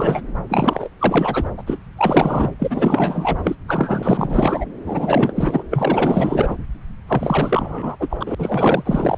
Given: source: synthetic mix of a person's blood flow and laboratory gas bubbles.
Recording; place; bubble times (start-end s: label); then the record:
Doppler ultrasound of blood flow; subclavian vein
0.00-0.21 s: bubbles
0.49-0.89 s: bubbles
0.99-1.50 s: bubbles
1.57-1.63 s: bubbles
1.67-1.77 s: bubbles
1.97-2.52 s: bubbles
2.59-3.56 s: bubbles
3.68-4.66 s: bubbles
4.85-5.64 s: bubbles
5.70-6.55 s: bubbles
7.08-7.96 s: bubbles
8.00-8.35 s: bubbles
8.38-9.18 s: bubbles
From the record:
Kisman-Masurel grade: 444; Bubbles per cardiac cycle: continuous sound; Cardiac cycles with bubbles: 100%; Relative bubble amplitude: maximal (0.775 to 0.999); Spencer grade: 4 (maximum detectable bubble signal sounding continuously throughout systole and diastole of every cardiac period, and overriding the amplitude of the normal cardiac signals); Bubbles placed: anywhere in the cardiac cycle